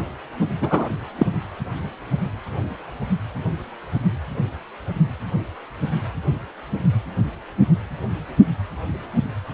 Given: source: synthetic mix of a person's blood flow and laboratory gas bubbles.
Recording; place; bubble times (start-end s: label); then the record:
Doppler ultrasound of blood flow; precordium
0.60-0.89 s: bubbles
1.18-1.27 s: bubbles
From the record:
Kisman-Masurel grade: 113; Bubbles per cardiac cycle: 1 to 2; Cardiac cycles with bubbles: 1 to 10%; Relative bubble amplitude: loud (0.450 to 0.775); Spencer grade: 1 (occasional bubble signal discernible with the cardiac motion signal, with majority of cardiac periods free of bubbles); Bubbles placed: only in the low amplitude regions of the cardiac cycle